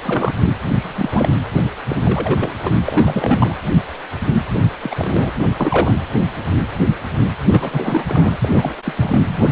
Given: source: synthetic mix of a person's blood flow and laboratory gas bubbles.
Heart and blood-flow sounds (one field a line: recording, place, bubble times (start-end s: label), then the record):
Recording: Doppler ultrasound of blood flow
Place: precordium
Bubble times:
0.00-0.35 s: bubbles
0.75-1.30 s: bubbles
1.64-1.69 s: bubbles
1.87-1.96 s: bubbles
2.02-2.54 s: bubbles
2.63-2.69 s: bubbles
2.85-3.56 s: bubbles
4.54-4.75 s: bubbles
4.82-5.31 s: bubbles
5.33-5.49 s: bubbles
5.59-5.95 s: bubbles
7.51-8.04 s: bubbles
8.07-8.35 s: bubbles
8.42-8.73 s: bubbles
8.85-8.93 s: bubbles
8.96-9.23 s: bubbles
9.28-9.52 s: bubbles
From the record:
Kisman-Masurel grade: 332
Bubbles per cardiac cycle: rolling drumbeat, 9 or more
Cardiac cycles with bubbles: 50 to 99%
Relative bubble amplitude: moderate (0.250 to 0.450)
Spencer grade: 3 (all of the cardiac periods contain showers or single bubble signals, but not dominating or overriding the cardiac motion signals)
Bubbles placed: anywhere in the cardiac cycle